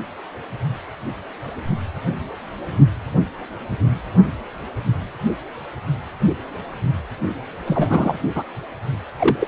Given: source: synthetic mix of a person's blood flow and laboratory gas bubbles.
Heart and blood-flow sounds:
Doppler ultrasound of blood flow; precordium
7.66-8.20 s: bubbles
8.35-8.43 s: bubbles
9.19-9.37 s: bubbles
9.40-9.47 s: bubbles
From the record:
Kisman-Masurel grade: 222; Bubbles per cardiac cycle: several, 3 to 8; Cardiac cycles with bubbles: 10 to 50%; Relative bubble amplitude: moderate (0.250 to 0.450); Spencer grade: 2 (many but less than half of the cardiac periods contain bubble signals, singularly or in groups); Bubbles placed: anywhere in the cardiac cycle

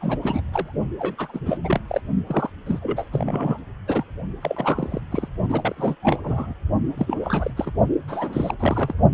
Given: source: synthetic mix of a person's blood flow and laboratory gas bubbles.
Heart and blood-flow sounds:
Doppler ultrasound of blood flow; precordium
0.01-0.19 s: bubbles
0.23-0.41 s: bubbles
0.51-0.73 s: bubbles
0.99-1.40 s: bubbles
1.45-1.58 s: bubbles
1.64-1.81 s: bubbles
1.88-2.01 s: bubbles
2.27-2.50 s: bubbles
2.66-3.07 s: bubbles
3.12-3.59 s: bubbles
3.87-4.04 s: bubbles
4.41-5.00 s: bubbles
5.10-5.28 s: bubbles
5.48-5.95 s: bubbles
6.00-6.53 s: bubbles
6.97-7.17 s: bubbles
7.20-7.51 s: bubbles
7.57-7.71 s: bubbles
8.08-8.54 s: bubbles
8.60-8.95 s: bubbles
From the record:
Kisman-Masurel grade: 342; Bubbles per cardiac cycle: rolling drumbeat, 9 or more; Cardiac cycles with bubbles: 100%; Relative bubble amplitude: moderate (0.250 to 0.450); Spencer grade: 3 (all of the cardiac periods contain showers or single bubble signals, but not dominating or overriding the cardiac motion signals); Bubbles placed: only in the low amplitude regions of the cardiac cycle

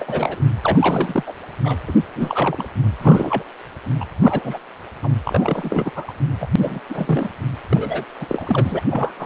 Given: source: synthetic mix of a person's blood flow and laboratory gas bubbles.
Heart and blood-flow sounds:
Doppler ultrasound of blood flow; precordium
0.00-0.42 s: bubbles
0.63-1.23 s: bubbles
1.27-1.33 s: bubbles
1.63-1.80 s: bubbles
1.86-1.93 s: bubbles
2.15-2.67 s: bubbles
2.99-3.44 s: bubbles
3.99-4.05 s: bubbles
4.23-4.58 s: bubbles
5.03-5.09 s: bubbles
5.24-5.91 s: bubbles
5.96-6.04 s: bubbles
6.08-6.12 s: bubbles
6.41-6.48 s: bubbles
6.60-6.80 s: bubbles
6.90-7.29 s: bubbles
7.69-8.04 s: bubbles
8.20-8.26 s: bubbles
8.29-8.81 s: bubbles
8.90-9.13 s: bubbles
9.18-9.26 s: bubbles
From the record:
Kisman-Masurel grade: 332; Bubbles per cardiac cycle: rolling drumbeat, 9 or more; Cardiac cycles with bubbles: 50 to 99%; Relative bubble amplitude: moderate (0.250 to 0.450); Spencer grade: 3 (all of the cardiac periods contain showers or single bubble signals, but not dominating or overriding the cardiac motion signals); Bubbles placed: anywhere in the cardiac cycle

